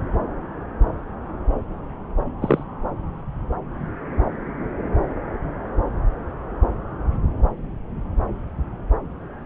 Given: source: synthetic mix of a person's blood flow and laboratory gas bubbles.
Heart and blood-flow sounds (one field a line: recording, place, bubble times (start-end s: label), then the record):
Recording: Doppler ultrasound of blood flow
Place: subclavian vein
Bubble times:
2.42-2.64 s: bubbles
From the record:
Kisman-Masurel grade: 123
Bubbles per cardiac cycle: 1 to 2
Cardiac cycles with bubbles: 10 to 50%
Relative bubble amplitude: loud (0.450 to 0.775)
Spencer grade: 2 (many but less than half of the cardiac periods contain bubble signals, singularly or in groups)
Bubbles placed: anywhere in the cardiac cycle